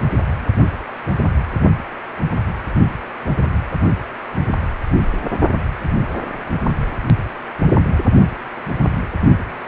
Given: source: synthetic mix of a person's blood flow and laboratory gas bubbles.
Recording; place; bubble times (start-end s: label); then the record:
Doppler ultrasound of blood flow; precordium
no bubbles
From the record:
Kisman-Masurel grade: 000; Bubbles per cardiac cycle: 0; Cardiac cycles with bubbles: 0%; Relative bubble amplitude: no bubbles discernible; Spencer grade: 0 (complete lack of bubble signals)